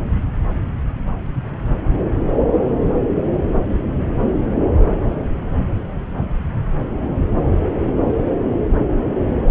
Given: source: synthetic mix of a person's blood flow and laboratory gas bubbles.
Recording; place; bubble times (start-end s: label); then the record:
Doppler ultrasound of blood flow; subclavian vein
no bubbles
From the record:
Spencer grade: 0 (complete lack of bubble signals)